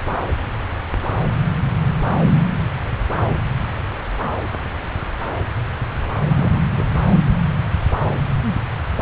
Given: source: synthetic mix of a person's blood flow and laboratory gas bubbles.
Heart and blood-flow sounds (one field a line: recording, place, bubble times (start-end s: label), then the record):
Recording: Doppler ultrasound of blood flow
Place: subclavian vein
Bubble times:
6.30-6.62 s: bubbles
6.77-6.87 s: bubbles
From the record:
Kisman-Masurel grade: 212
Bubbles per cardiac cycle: several, 3 to 8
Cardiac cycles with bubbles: 1 to 10%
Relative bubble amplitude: moderate (0.250 to 0.450)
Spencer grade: 1 (occasional bubble signal discernible with the cardiac motion signal, with majority of cardiac periods free of bubbles)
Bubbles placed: anywhere in the cardiac cycle